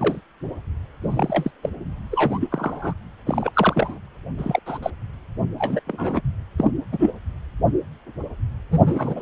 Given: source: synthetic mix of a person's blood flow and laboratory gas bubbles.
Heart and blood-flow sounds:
Doppler ultrasound of blood flow; precordium
0.00-0.21 s: bubbles
1.02-1.50 s: bubbles
1.63-1.70 s: bubbles
2.11-2.93 s: bubbles
3.26-3.98 s: bubbles
4.38-4.59 s: bubbles
4.66-4.78 s: bubbles
4.82-4.90 s: bubbles
5.58-5.80 s: bubbles
5.87-6.21 s: bubbles
6.58-6.71 s: bubbles
6.92-7.11 s: bubbles
8.71-9.22 s: bubbles
From the record:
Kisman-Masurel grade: 232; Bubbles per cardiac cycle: several, 3 to 8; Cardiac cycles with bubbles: 50 to 99%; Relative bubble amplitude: moderate (0.250 to 0.450); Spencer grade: 3 (all of the cardiac periods contain showers or single bubble signals, but not dominating or overriding the cardiac motion signals); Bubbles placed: anywhere in the cardiac cycle

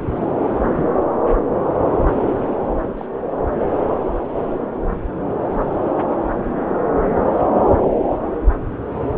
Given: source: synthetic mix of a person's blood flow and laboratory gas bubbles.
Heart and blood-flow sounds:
Doppler ultrasound of blood flow; subclavian vein
0.76-0.86 s: bubbles
2.96-3.07 s: bubbles
From the record:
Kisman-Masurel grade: 121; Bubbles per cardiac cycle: 1 to 2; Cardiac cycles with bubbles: 10 to 50%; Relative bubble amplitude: barely perceptible (0.100 to 0.250); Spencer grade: 2 (many but less than half of the cardiac periods contain bubble signals, singularly or in groups); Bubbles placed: anywhere in the cardiac cycle

